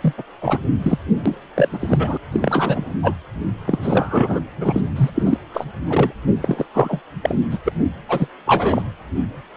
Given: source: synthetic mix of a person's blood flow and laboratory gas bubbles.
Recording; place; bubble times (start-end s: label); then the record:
Doppler ultrasound of blood flow; precordium
0.02-0.13 s: bubbles
0.18-0.23 s: bubbles
0.42-0.59 s: bubbles
0.82-0.99 s: bubbles
1.26-1.35 s: bubbles
1.55-1.69 s: bubbles
1.73-2.17 s: bubbles
2.32-2.92 s: bubbles
3.02-3.14 s: bubbles
3.66-3.79 s: bubbles
3.82-4.40 s: bubbles
4.61-4.82 s: bubbles
4.96-5.10 s: bubbles
5.15-5.38 s: bubbles
5.54-5.67 s: bubbles
5.90-6.12 s: bubbles
6.42-6.65 s: bubbles
6.74-7.00 s: bubbles
7.23-7.35 s: bubbles
7.50-7.58 s: bubbles
7.65-7.72 s: bubbles
8.08-8.27 s: bubbles
8.47-8.82 s: bubbles
From the record:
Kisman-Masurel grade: 332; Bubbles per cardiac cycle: rolling drumbeat, 9 or more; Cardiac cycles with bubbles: 50 to 99%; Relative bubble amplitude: moderate (0.250 to 0.450); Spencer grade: 3 (all of the cardiac periods contain showers or single bubble signals, but not dominating or overriding the cardiac motion signals); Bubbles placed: anywhere in the cardiac cycle